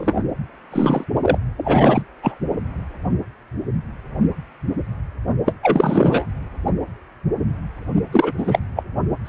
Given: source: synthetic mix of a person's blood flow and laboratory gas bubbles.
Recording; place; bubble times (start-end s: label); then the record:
Doppler ultrasound of blood flow; precordium
0.00-0.24 s: bubbles
0.72-1.04 s: bubbles
1.22-1.38 s: bubbles
1.57-2.02 s: bubbles
2.21-2.39 s: bubbles
5.46-5.54 s: bubbles
5.62-6.26 s: bubbles
8.12-8.33 s: bubbles
8.38-8.59 s: bubbles
8.76-8.83 s: bubbles
9.25-9.29 s: bubbles
From the record:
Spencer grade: 3 (all of the cardiac periods contain showers or single bubble signals, but not dominating or overriding the cardiac motion signals); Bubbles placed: only in the low amplitude regions of the cardiac cycle